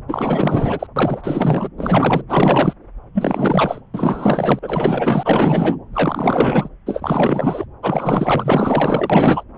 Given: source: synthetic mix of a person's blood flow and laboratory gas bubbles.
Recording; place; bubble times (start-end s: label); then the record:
Doppler ultrasound of blood flow; subclavian vein
0.08-0.87 s: bubbles
0.96-1.69 s: bubbles
1.78-2.22 s: bubbles
2.28-2.73 s: bubbles
3.14-3.81 s: bubbles
3.94-4.59 s: bubbles
4.62-5.77 s: bubbles
5.93-6.69 s: bubbles
6.86-7.65 s: bubbles
7.82-9.44 s: bubbles
From the record:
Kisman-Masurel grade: 444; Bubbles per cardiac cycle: continuous sound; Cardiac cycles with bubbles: 100%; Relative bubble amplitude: maximal (0.775 to 0.999); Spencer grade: 4 (maximum detectable bubble signal sounding continuously throughout systole and diastole of every cardiac period, and overriding the amplitude of the normal cardiac signals); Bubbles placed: anywhere in the cardiac cycle